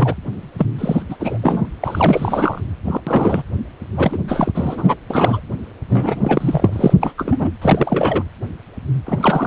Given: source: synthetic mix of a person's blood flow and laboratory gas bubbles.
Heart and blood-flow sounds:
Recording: Doppler ultrasound of blood flow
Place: precordium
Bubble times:
0.00-0.14 s: bubbles
0.58-0.67 s: bubbles
0.78-1.02 s: bubbles
1.09-1.16 s: bubbles
1.19-1.38 s: bubbles
1.41-1.68 s: bubbles
1.80-2.60 s: bubbles
2.84-3.00 s: bubbles
3.06-3.43 s: bubbles
3.92-4.18 s: bubbles
4.28-4.52 s: bubbles
4.54-4.95 s: bubbles
5.10-5.40 s: bubbles
5.89-6.94 s: bubbles
7.02-7.12 s: bubbles
7.17-7.50 s: bubbles
7.62-8.23 s: bubbles
9.06-9.47 s: bubbles
From the record:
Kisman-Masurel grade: 333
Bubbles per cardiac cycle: rolling drumbeat, 9 or more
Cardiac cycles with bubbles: 50 to 99%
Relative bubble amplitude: loud (0.450 to 0.775)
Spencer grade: 3 (all of the cardiac periods contain showers or single bubble signals, but not dominating or overriding the cardiac motion signals)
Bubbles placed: anywhere in the cardiac cycle

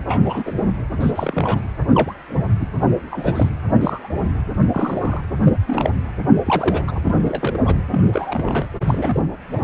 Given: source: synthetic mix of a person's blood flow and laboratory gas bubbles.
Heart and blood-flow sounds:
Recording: Doppler ultrasound of blood flow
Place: precordium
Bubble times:
0.07-0.52 s: bubbles
0.57-0.64 s: bubbles
1.00-1.11 s: bubbles
1.15-1.62 s: bubbles
1.90-2.14 s: bubbles
2.28-2.39 s: bubbles
2.60-2.67 s: bubbles
3.10-3.51 s: bubbles
3.73-4.09 s: bubbles
4.71-5.21 s: bubbles
5.45-5.61 s: bubbles
5.67-5.92 s: bubbles
6.45-6.84 s: bubbles
6.87-7.00 s: bubbles
7.04-7.15 s: bubbles
7.23-7.59 s: bubbles
7.66-7.77 s: bubbles
7.91-8.09 s: bubbles
8.12-8.66 s: bubbles
8.87-9.22 s: bubbles
9.51-9.58 s: bubbles
From the record:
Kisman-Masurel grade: 232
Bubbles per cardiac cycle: several, 3 to 8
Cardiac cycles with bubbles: 50 to 99%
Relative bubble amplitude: moderate (0.250 to 0.450)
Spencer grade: 3 (all of the cardiac periods contain showers or single bubble signals, but not dominating or overriding the cardiac motion signals)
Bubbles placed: anywhere in the cardiac cycle

